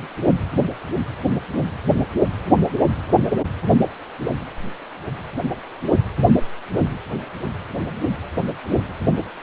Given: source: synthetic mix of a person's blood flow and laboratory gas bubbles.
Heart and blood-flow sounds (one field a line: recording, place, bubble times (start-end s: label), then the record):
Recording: Doppler ultrasound of blood flow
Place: precordium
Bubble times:
no bubbles
From the record:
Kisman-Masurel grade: 000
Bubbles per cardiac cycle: 0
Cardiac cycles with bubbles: 0%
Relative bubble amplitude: no bubbles discernible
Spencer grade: 0 (complete lack of bubble signals)